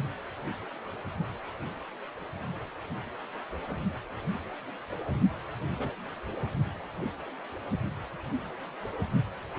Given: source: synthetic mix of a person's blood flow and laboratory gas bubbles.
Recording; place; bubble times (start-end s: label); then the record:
Doppler ultrasound of blood flow; precordium
5.78-5.90 s: bubbles
From the record:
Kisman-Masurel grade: 111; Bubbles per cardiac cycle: 1 to 2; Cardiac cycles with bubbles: 1 to 10%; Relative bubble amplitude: barely perceptible (0.100 to 0.250); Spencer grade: 1 (occasional bubble signal discernible with the cardiac motion signal, with majority of cardiac periods free of bubbles); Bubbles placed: only in the low amplitude regions of the cardiac cycle